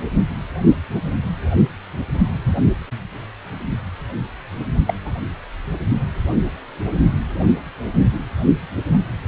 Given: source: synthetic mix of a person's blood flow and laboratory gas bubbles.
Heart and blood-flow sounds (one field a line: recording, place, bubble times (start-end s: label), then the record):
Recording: Doppler ultrasound of blood flow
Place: precordium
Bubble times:
4.87-4.94 s: bubbles
5.05-5.12 s: bubbles
From the record:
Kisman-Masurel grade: 112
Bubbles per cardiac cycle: 1 to 2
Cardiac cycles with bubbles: 1 to 10%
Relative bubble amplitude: moderate (0.250 to 0.450)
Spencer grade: 1 (occasional bubble signal discernible with the cardiac motion signal, with majority of cardiac periods free of bubbles)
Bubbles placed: anywhere in the cardiac cycle